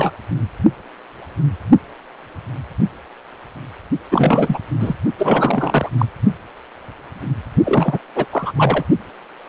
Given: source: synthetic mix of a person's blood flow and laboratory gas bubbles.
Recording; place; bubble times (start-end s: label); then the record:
Doppler ultrasound of blood flow; precordium
0.00-0.11 s: bubbles
4.11-4.59 s: bubbles
4.79-4.93 s: bubbles
5.18-5.91 s: bubbles
5.98-6.05 s: bubbles
7.65-7.98 s: bubbles
8.15-8.26 s: bubbles
8.32-8.53 s: bubbles
8.57-8.85 s: bubbles
From the record:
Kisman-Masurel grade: 333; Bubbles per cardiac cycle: rolling drumbeat, 9 or more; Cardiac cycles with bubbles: 50 to 99%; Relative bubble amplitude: loud (0.450 to 0.775); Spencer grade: 3 (all of the cardiac periods contain showers or single bubble signals, but not dominating or overriding the cardiac motion signals); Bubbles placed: only in the low amplitude regions of the cardiac cycle